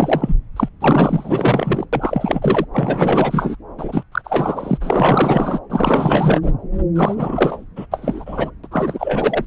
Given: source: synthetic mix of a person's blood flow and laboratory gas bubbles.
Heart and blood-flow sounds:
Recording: Doppler ultrasound of blood flow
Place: subclavian vein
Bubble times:
0.00-0.35 s: bubbles
0.56-0.69 s: bubbles
0.81-1.86 s: bubbles
1.93-2.66 s: bubbles
2.73-3.56 s: bubbles
3.77-4.03 s: bubbles
4.11-4.21 s: bubbles
4.24-4.78 s: bubbles
4.80-5.59 s: bubbles
5.69-6.51 s: bubbles
6.96-7.65 s: bubbles
7.76-7.86 s: bubbles
7.91-8.50 s: bubbles
8.63-8.67 s: bubbles
8.71-9.45 s: bubbles
From the record:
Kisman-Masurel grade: 444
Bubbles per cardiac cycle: continuous sound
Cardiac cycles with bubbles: 100%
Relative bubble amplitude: maximal (0.775 to 0.999)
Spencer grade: 4 (maximum detectable bubble signal sounding continuously throughout systole and diastole of every cardiac period, and overriding the amplitude of the normal cardiac signals)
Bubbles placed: anywhere in the cardiac cycle

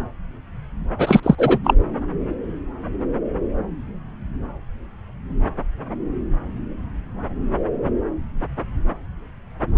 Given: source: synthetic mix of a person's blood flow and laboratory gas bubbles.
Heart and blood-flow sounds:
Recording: Doppler ultrasound of blood flow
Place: subclavian vein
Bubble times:
0.98-1.20 s: bubbles
1.22-1.35 s: bubbles
1.38-1.58 s: bubbles
1.64-1.74 s: bubbles
From the record:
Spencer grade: 1 (occasional bubble signal discernible with the cardiac motion signal, with majority of cardiac periods free of bubbles)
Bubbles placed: anywhere in the cardiac cycle

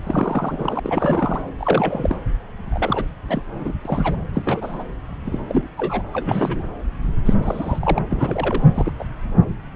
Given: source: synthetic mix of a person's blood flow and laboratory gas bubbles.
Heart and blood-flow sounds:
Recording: Doppler ultrasound of blood flow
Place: subclavian vein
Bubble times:
0.04-0.80 s: bubbles
0.84-1.41 s: bubbles
1.59-2.17 s: bubbles
2.72-3.05 s: bubbles
3.29-3.43 s: bubbles
3.55-3.73 s: bubbles
3.85-4.17 s: bubbles
4.33-4.83 s: bubbles
5.25-5.40 s: bubbles
5.49-5.67 s: bubbles
5.78-6.03 s: bubbles
6.12-6.63 s: bubbles
7.25-7.34 s: bubbles
7.42-7.99 s: bubbles
8.11-8.63 s: bubbles
8.74-8.93 s: bubbles
8.99-9.04 s: bubbles
From the record:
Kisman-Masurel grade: 232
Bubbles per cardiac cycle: several, 3 to 8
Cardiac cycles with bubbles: 50 to 99%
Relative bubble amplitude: moderate (0.250 to 0.450)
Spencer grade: 3 (all of the cardiac periods contain showers or single bubble signals, but not dominating or overriding the cardiac motion signals)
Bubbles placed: anywhere in the cardiac cycle

